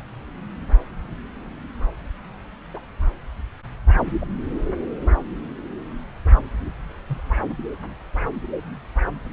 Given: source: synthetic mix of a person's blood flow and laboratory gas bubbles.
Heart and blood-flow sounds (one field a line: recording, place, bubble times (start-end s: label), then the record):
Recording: Doppler ultrasound of blood flow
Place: subclavian vein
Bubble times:
2.73-2.81 s: bubbles
4.06-4.12 s: bubbles
4.21-4.26 s: bubbles
7.08-7.21 s: bubbles
From the record:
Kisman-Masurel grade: 121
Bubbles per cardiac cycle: 1 to 2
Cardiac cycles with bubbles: 10 to 50%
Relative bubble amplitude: barely perceptible (0.100 to 0.250)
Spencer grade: 2 (many but less than half of the cardiac periods contain bubble signals, singularly or in groups)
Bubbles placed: anywhere in the cardiac cycle